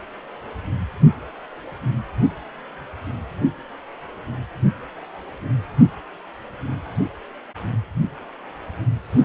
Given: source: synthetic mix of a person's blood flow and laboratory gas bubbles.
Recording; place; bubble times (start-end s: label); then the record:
Doppler ultrasound of blood flow; precordium
no bubbles
From the record:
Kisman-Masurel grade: 000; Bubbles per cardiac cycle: 0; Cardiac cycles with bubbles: 0%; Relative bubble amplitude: no bubbles discernible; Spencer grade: 0 (complete lack of bubble signals)